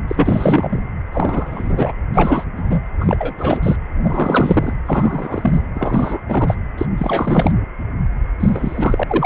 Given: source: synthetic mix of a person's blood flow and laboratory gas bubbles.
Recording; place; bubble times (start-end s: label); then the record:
Doppler ultrasound of blood flow; precordium
0.08-0.80 s: bubbles
1.12-1.93 s: bubbles
2.14-2.44 s: bubbles
2.56-2.81 s: bubbles
3.00-3.76 s: bubbles
4.03-4.73 s: bubbles
4.85-5.63 s: bubbles
5.75-6.20 s: bubbles
6.29-6.56 s: bubbles
6.77-6.85 s: bubbles
6.97-7.52 s: bubbles
8.39-9.04 s: bubbles
9.07-9.26 s: bubbles
From the record:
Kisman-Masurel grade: 343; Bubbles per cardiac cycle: rolling drumbeat, 9 or more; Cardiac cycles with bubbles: 100%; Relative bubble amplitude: loud (0.450 to 0.775); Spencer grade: 3 (all of the cardiac periods contain showers or single bubble signals, but not dominating or overriding the cardiac motion signals); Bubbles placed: anywhere in the cardiac cycle